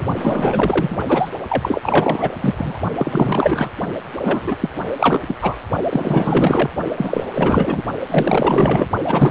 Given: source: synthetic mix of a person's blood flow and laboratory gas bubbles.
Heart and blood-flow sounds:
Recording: Doppler ultrasound of blood flow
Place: precordium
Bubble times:
0.00-0.06 s: bubbles
0.15-0.98 s: bubbles
1.07-1.31 s: bubbles
1.48-2.79 s: bubbles
2.98-3.71 s: bubbles
4.17-4.57 s: bubbles
4.61-4.71 s: bubbles
4.97-5.22 s: bubbles
5.28-5.38 s: bubbles
5.42-5.57 s: bubbles
5.91-6.69 s: bubbles
6.97-7.25 s: bubbles
7.33-7.82 s: bubbles
8.07-8.88 s: bubbles
9.07-9.31 s: bubbles
From the record:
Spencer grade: 4 (maximum detectable bubble signal sounding continuously throughout systole and diastole of every cardiac period, and overriding the amplitude of the normal cardiac signals)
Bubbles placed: only in the low amplitude regions of the cardiac cycle

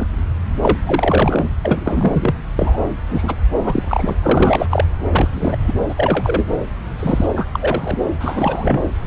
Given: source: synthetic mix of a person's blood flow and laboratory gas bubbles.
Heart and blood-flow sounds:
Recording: Doppler ultrasound of blood flow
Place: subclavian vein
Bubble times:
0.00-0.07 s: bubbles
0.62-0.78 s: bubbles
0.85-1.49 s: bubbles
1.62-2.35 s: bubbles
2.55-2.79 s: bubbles
3.09-3.37 s: bubbles
3.64-4.16 s: bubbles
4.22-4.66 s: bubbles
4.71-4.85 s: bubbles
5.12-5.75 s: bubbles
5.89-5.95 s: bubbles
5.97-6.52 s: bubbles
6.99-7.27 s: bubbles
7.36-7.46 s: bubbles
7.55-7.98 s: bubbles
8.20-8.82 s: bubbles
From the record:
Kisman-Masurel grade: 243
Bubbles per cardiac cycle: several, 3 to 8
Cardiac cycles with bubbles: 100%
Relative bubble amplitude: loud (0.450 to 0.775)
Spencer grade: 3 (all of the cardiac periods contain showers or single bubble signals, but not dominating or overriding the cardiac motion signals)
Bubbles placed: anywhere in the cardiac cycle

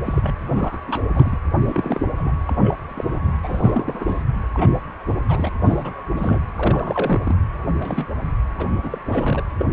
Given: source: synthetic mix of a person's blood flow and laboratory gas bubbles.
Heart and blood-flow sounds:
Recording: Doppler ultrasound of blood flow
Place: precordium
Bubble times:
0.05-0.34 s: bubbles
0.45-0.81 s: bubbles
0.87-1.05 s: bubbles
1.14-1.38 s: bubbles
1.62-2.00 s: bubbles
2.17-2.35 s: bubbles
2.46-2.55 s: bubbles
2.59-2.75 s: bubbles
2.89-3.18 s: bubbles
3.43-4.24 s: bubbles
4.52-4.70 s: bubbles
5.07-5.19 s: bubbles
5.28-5.49 s: bubbles
5.66-6.03 s: bubbles
6.13-6.40 s: bubbles
6.56-7.35 s: bubbles
7.75-8.05 s: bubbles
8.58-8.68 s: bubbles
8.83-8.98 s: bubbles
9.05-9.44 s: bubbles
9.58-9.66 s: bubbles
From the record:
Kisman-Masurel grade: 242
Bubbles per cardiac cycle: several, 3 to 8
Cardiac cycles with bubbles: 100%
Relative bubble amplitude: moderate (0.250 to 0.450)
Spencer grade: 3 (all of the cardiac periods contain showers or single bubble signals, but not dominating or overriding the cardiac motion signals)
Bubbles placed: anywhere in the cardiac cycle

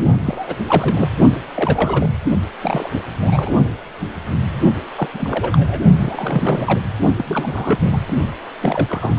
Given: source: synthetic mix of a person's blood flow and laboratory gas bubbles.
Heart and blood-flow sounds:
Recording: Doppler ultrasound of blood flow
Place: precordium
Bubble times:
0.25-0.57 s: bubbles
0.66-1.08 s: bubbles
1.56-2.12 s: bubbles
2.62-3.01 s: bubbles
3.22-3.53 s: bubbles
4.96-5.08 s: bubbles
5.14-5.82 s: bubbles
5.98-6.80 s: bubbles
7.17-7.98 s: bubbles
8.60-9.19 s: bubbles
From the record:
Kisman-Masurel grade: 332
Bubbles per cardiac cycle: rolling drumbeat, 9 or more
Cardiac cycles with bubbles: 50 to 99%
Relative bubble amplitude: moderate (0.250 to 0.450)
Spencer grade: 3 (all of the cardiac periods contain showers or single bubble signals, but not dominating or overriding the cardiac motion signals)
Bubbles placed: only in the low amplitude regions of the cardiac cycle

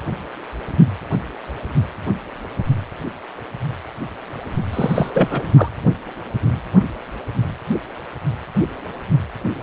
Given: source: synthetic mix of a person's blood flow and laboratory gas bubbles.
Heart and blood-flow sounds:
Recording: Doppler ultrasound of blood flow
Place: precordium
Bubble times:
4.73-5.10 s: bubbles
5.13-5.53 s: bubbles
5.57-5.68 s: bubbles
From the record:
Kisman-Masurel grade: 213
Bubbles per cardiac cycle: several, 3 to 8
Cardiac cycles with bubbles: 1 to 10%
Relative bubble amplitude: loud (0.450 to 0.775)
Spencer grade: 1 (occasional bubble signal discernible with the cardiac motion signal, with majority of cardiac periods free of bubbles)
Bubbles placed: anywhere in the cardiac cycle

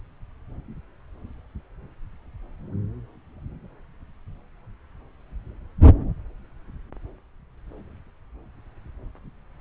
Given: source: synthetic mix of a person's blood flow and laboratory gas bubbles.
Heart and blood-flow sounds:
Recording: Doppler ultrasound of blood flow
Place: subclavian vein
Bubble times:
no bubbles
From the record:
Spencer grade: 0 (complete lack of bubble signals)

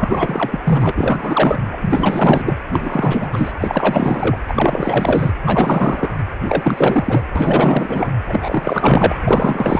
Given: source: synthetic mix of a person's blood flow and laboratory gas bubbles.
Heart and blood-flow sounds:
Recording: Doppler ultrasound of blood flow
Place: precordium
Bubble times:
0.00-0.60 s: bubbles
0.64-0.92 s: bubbles
0.95-1.78 s: bubbles
1.81-2.56 s: bubbles
2.72-3.52 s: bubbles
3.60-4.38 s: bubbles
4.48-5.33 s: bubbles
5.46-6.17 s: bubbles
6.43-7.22 s: bubbles
7.36-8.12 s: bubbles
8.29-9.18 s: bubbles
9.24-9.80 s: bubbles
From the record:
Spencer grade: 4 (maximum detectable bubble signal sounding continuously throughout systole and diastole of every cardiac period, and overriding the amplitude of the normal cardiac signals)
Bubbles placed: anywhere in the cardiac cycle

